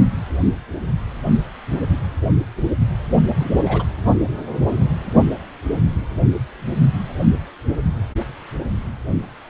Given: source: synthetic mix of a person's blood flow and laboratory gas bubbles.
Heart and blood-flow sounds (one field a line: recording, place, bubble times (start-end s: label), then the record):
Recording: Doppler ultrasound of blood flow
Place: precordium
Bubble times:
3.40-3.52 s: bubbles
3.65-3.83 s: bubbles
From the record:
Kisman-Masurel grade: 112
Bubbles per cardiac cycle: 1 to 2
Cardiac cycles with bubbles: 1 to 10%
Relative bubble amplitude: moderate (0.250 to 0.450)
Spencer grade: 1 (occasional bubble signal discernible with the cardiac motion signal, with majority of cardiac periods free of bubbles)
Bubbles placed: anywhere in the cardiac cycle